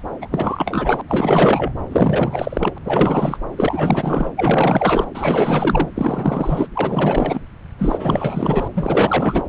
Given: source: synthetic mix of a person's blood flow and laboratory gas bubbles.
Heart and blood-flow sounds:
Doppler ultrasound of blood flow; subclavian vein
0.21-1.02 s: bubbles
1.08-1.73 s: bubbles
1.92-2.78 s: bubbles
2.83-3.38 s: bubbles
3.56-4.32 s: bubbles
4.36-5.09 s: bubbles
5.14-5.89 s: bubbles
5.96-6.67 s: bubbles
6.74-7.41 s: bubbles
7.78-8.68 s: bubbles
8.74-9.43 s: bubbles
From the record:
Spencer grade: 4 (maximum detectable bubble signal sounding continuously throughout systole and diastole of every cardiac period, and overriding the amplitude of the normal cardiac signals); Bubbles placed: anywhere in the cardiac cycle

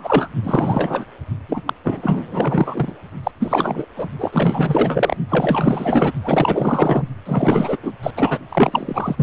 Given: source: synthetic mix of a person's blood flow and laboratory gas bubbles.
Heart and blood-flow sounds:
Doppler ultrasound of blood flow; precordium
0.00-0.30 s: bubbles
0.43-1.05 s: bubbles
1.48-1.61 s: bubbles
1.67-1.73 s: bubbles
1.83-2.92 s: bubbles
3.23-3.31 s: bubbles
3.39-3.85 s: bubbles
3.96-4.08 s: bubbles
4.19-5.17 s: bubbles
5.29-6.12 s: bubbles
6.24-7.08 s: bubbles
7.25-7.77 s: bubbles
7.83-7.93 s: bubbles
8.02-8.10 s: bubbles
8.15-8.38 s: bubbles
8.49-9.23 s: bubbles
From the record:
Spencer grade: 4 (maximum detectable bubble signal sounding continuously throughout systole and diastole of every cardiac period, and overriding the amplitude of the normal cardiac signals); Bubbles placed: only in the low amplitude regions of the cardiac cycle

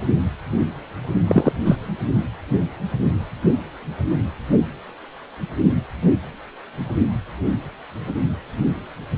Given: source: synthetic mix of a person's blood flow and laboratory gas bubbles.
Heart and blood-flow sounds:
Doppler ultrasound of blood flow; precordium
1.27-1.52 s: bubbles
1.65-1.75 s: bubbles
From the record:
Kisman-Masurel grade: 113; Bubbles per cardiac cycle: 1 to 2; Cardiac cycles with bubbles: 1 to 10%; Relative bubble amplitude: loud (0.450 to 0.775); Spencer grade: 1 (occasional bubble signal discernible with the cardiac motion signal, with majority of cardiac periods free of bubbles); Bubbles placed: only in the low amplitude regions of the cardiac cycle

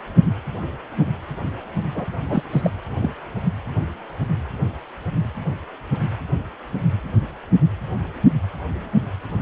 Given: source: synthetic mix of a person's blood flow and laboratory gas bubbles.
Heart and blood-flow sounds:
Doppler ultrasound of blood flow; precordium
1.95-2.10 s: bubbles
2.29-2.43 s: bubbles
2.51-2.70 s: bubbles
3.02-3.10 s: bubbles
From the record:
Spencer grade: 1 (occasional bubble signal discernible with the cardiac motion signal, with majority of cardiac periods free of bubbles); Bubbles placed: anywhere in the cardiac cycle

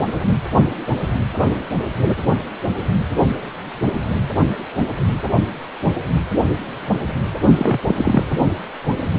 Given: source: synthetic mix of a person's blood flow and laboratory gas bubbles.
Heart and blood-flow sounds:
Doppler ultrasound of blood flow; precordium
7.56-7.80 s: bubbles
7.87-8.25 s: bubbles
From the record:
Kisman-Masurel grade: 222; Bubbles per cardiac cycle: several, 3 to 8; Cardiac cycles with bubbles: 10 to 50%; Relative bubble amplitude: moderate (0.250 to 0.450); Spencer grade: 2 (many but less than half of the cardiac periods contain bubble signals, singularly or in groups); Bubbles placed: only in the low amplitude regions of the cardiac cycle

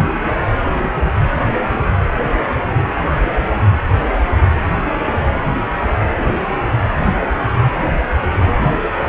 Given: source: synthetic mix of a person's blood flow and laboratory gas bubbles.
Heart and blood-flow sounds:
Doppler ultrasound of blood flow; precordium
0.61-0.92 s: bubbles
0.96-1.14 s: bubbles
From the record:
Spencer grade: 1 (occasional bubble signal discernible with the cardiac motion signal, with majority of cardiac periods free of bubbles); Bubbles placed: anywhere in the cardiac cycle

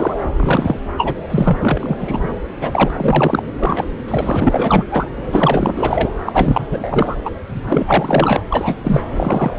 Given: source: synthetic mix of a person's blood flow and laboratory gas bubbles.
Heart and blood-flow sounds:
Doppler ultrasound of blood flow; subclavian vein
0.00-0.14 s: bubbles
0.36-0.79 s: bubbles
0.97-1.18 s: bubbles
1.30-1.97 s: bubbles
1.99-2.19 s: bubbles
2.24-2.29 s: bubbles
2.61-3.43 s: bubbles
3.58-3.86 s: bubbles
4.08-4.84 s: bubbles
4.89-5.09 s: bubbles
5.33-6.12 s: bubbles
6.25-7.16 s: bubbles
7.25-7.30 s: bubbles
7.62-8.42 s: bubbles
8.50-8.76 s: bubbles
8.83-9.02 s: bubbles
9.13-9.54 s: bubbles
From the record:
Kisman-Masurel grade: 444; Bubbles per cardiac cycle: continuous sound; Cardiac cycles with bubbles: 100%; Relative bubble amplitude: maximal (0.775 to 0.999); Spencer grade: 4 (maximum detectable bubble signal sounding continuously throughout systole and diastole of every cardiac period, and overriding the amplitude of the normal cardiac signals); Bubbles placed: anywhere in the cardiac cycle

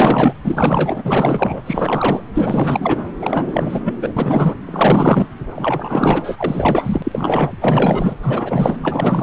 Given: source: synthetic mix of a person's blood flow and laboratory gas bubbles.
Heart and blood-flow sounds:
Doppler ultrasound of blood flow; subclavian vein
0.00-0.33 s: bubbles
0.43-1.61 s: bubbles
1.66-2.21 s: bubbles
2.33-3.02 s: bubbles
3.21-3.81 s: bubbles
3.84-3.94 s: bubbles
4.02-4.13 s: bubbles
4.17-4.54 s: bubbles
4.67-5.26 s: bubbles
5.55-8.14 s: bubbles
8.22-8.77 s: bubbles
8.82-9.23 s: bubbles
From the record:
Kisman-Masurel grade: 444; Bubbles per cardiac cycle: continuous sound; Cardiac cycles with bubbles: 100%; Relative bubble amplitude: maximal (0.775 to 0.999); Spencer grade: 4 (maximum detectable bubble signal sounding continuously throughout systole and diastole of every cardiac period, and overriding the amplitude of the normal cardiac signals); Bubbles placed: anywhere in the cardiac cycle

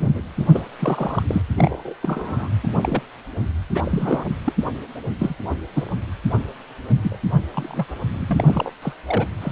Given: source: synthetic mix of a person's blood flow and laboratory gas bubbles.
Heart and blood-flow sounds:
Doppler ultrasound of blood flow; precordium
0.00-0.23 s: bubbles
0.36-0.67 s: bubbles
0.79-1.23 s: bubbles
1.28-1.42 s: bubbles
1.55-1.94 s: bubbles
2.02-2.48 s: bubbles
2.63-2.68 s: bubbles
2.81-3.02 s: bubbles
3.74-4.25 s: bubbles
4.46-4.53 s: bubbles
5.19-5.35 s: bubbles
5.50-5.56 s: bubbles
5.74-5.96 s: bubbles
7.03-7.17 s: bubbles
7.54-7.86 s: bubbles
8.12-8.72 s: bubbles
8.81-8.93 s: bubbles
9.06-9.27 s: bubbles
9.41-9.51 s: bubbles
From the record:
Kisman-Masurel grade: 232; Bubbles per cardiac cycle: several, 3 to 8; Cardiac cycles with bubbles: 50 to 99%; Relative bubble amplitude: moderate (0.250 to 0.450); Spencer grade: 3 (all of the cardiac periods contain showers or single bubble signals, but not dominating or overriding the cardiac motion signals); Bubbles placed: anywhere in the cardiac cycle

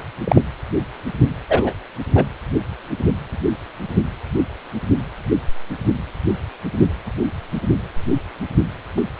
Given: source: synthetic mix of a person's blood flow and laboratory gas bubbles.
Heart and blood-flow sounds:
Doppler ultrasound of blood flow; precordium
0.00-0.04 s: bubbles
0.24-0.42 s: bubbles
1.49-1.74 s: bubbles
2.15-2.25 s: bubbles
8.96-9.02 s: bubbles
From the record:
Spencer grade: 2 (many but less than half of the cardiac periods contain bubble signals, singularly or in groups); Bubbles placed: anywhere in the cardiac cycle

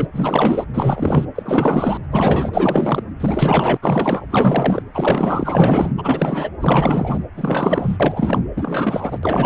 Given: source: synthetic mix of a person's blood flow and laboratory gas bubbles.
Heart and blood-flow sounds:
Doppler ultrasound of blood flow; precordium
0.00-0.07 s: bubbles
0.13-0.65 s: bubbles
0.73-1.25 s: bubbles
1.35-1.98 s: bubbles
2.10-3.03 s: bubbles
3.20-3.77 s: bubbles
3.81-4.26 s: bubbles
4.30-4.82 s: bubbles
4.94-5.93 s: bubbles
5.97-6.49 s: bubbles
6.60-7.25 s: bubbles
7.36-7.97 s: bubbles
7.99-8.41 s: bubbles
8.56-9.19 s: bubbles
9.23-9.46 s: bubbles
From the record:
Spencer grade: 4 (maximum detectable bubble signal sounding continuously throughout systole and diastole of every cardiac period, and overriding the amplitude of the normal cardiac signals); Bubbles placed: anywhere in the cardiac cycle

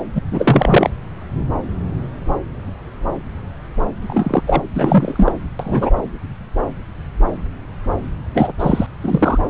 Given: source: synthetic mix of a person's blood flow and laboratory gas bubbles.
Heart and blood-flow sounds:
Doppler ultrasound of blood flow; subclavian vein
0.14-0.21 s: bubbles
0.31-0.90 s: bubbles
4.02-4.42 s: bubbles
4.47-4.63 s: bubbles
4.74-5.32 s: bubbles
5.59-5.90 s: bubbles
8.34-8.53 s: bubbles
8.59-8.87 s: bubbles
9.01-9.38 s: bubbles
From the record:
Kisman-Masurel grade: 223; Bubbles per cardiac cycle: several, 3 to 8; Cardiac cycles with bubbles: 10 to 50%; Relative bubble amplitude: loud (0.450 to 0.775); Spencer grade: 2 (many but less than half of the cardiac periods contain bubble signals, singularly or in groups); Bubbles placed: anywhere in the cardiac cycle

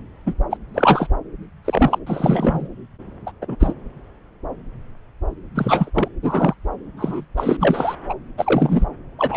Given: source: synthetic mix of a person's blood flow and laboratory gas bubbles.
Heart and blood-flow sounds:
Doppler ultrasound of blood flow; subclavian vein
0.26-0.34 s: bubbles
0.51-0.57 s: bubbles
0.74-1.08 s: bubbles
1.65-1.98 s: bubbles
2.06-2.68 s: bubbles
3.26-3.31 s: bubbles
3.41-3.56 s: bubbles
3.60-3.74 s: bubbles
5.55-5.90 s: bubbles
5.94-6.08 s: bubbles
6.22-6.54 s: bubbles
6.97-7.25 s: bubbles
7.36-7.57 s: bubbles
7.59-7.95 s: bubbles
8.09-8.14 s: bubbles
8.38-8.86 s: bubbles
9.18-9.37 s: bubbles
From the record:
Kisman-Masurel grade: 233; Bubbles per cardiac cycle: several, 3 to 8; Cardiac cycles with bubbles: 50 to 99%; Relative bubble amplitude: loud (0.450 to 0.775); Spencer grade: 3 (all of the cardiac periods contain showers or single bubble signals, but not dominating or overriding the cardiac motion signals); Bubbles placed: anywhere in the cardiac cycle

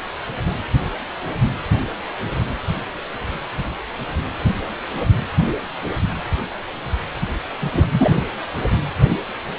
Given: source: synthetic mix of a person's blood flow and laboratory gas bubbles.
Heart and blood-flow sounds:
Doppler ultrasound of blood flow; precordium
7.61-7.87 s: bubbles
7.91-8.24 s: bubbles
From the record:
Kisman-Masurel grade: 212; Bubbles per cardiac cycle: several, 3 to 8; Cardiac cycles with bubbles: 1 to 10%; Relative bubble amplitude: moderate (0.250 to 0.450); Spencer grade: 1 (occasional bubble signal discernible with the cardiac motion signal, with majority of cardiac periods free of bubbles); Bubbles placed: anywhere in the cardiac cycle

